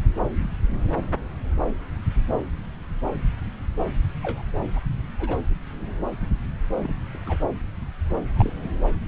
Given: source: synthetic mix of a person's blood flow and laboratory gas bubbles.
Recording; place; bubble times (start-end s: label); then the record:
Doppler ultrasound of blood flow; subclavian vein
4.22-4.42 s: bubbles
4.73-4.79 s: bubbles
5.19-5.37 s: bubbles
6.75-7.19 s: bubbles
7.26-7.36 s: bubbles
8.36-8.54 s: bubbles
From the record:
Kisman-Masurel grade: 121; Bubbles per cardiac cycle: 1 to 2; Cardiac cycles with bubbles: 10 to 50%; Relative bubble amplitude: barely perceptible (0.100 to 0.250); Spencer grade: 2 (many but less than half of the cardiac periods contain bubble signals, singularly or in groups); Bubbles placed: anywhere in the cardiac cycle